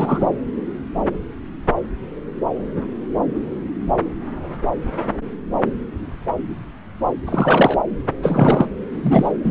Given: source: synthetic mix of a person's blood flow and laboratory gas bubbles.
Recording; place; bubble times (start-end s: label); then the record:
Doppler ultrasound of blood flow; subclavian vein
0.00-0.27 s: bubbles
7.26-7.77 s: bubbles
8.22-8.66 s: bubbles
8.93-9.32 s: bubbles
9.44-9.51 s: bubbles
From the record:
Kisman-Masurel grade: 223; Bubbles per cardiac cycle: several, 3 to 8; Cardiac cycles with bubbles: 10 to 50%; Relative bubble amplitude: loud (0.450 to 0.775); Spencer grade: 2 (many but less than half of the cardiac periods contain bubble signals, singularly or in groups); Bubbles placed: anywhere in the cardiac cycle